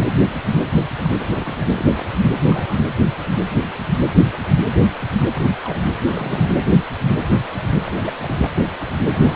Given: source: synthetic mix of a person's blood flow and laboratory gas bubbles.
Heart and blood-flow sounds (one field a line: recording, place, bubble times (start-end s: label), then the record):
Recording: Doppler ultrasound of blood flow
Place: precordium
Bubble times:
0.01-0.05 s: bubbles
1.04-1.13 s: bubbles
1.18-1.66 s: bubbles
1.75-1.91 s: bubbles
1.96-2.06 s: bubbles
2.39-2.81 s: bubbles
5.33-5.55 s: bubbles
5.64-5.78 s: bubbles
6.08-6.55 s: bubbles
7.87-7.92 s: bubbles
7.96-8.48 s: bubbles
9.12-9.36 s: bubbles
From the record:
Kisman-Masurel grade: 221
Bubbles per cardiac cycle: several, 3 to 8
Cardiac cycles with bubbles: 10 to 50%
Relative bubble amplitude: barely perceptible (0.100 to 0.250)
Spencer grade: 2 (many but less than half of the cardiac periods contain bubble signals, singularly or in groups)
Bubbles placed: anywhere in the cardiac cycle